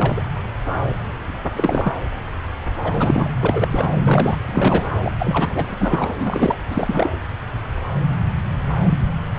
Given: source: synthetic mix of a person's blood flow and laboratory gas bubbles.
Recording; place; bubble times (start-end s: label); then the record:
Doppler ultrasound of blood flow; subclavian vein
0.00-0.27 s: bubbles
1.55-1.93 s: bubbles
2.83-3.33 s: bubbles
3.40-3.68 s: bubbles
3.71-3.89 s: bubbles
3.98-4.38 s: bubbles
4.47-4.86 s: bubbles
5.03-5.12 s: bubbles
5.19-5.65 s: bubbles
5.67-6.12 s: bubbles
6.19-6.57 s: bubbles
6.69-7.14 s: bubbles
From the record:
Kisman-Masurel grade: 332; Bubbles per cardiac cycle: rolling drumbeat, 9 or more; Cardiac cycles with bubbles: 50 to 99%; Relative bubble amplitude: moderate (0.250 to 0.450); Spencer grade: 3 (all of the cardiac periods contain showers or single bubble signals, but not dominating or overriding the cardiac motion signals); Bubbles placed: anywhere in the cardiac cycle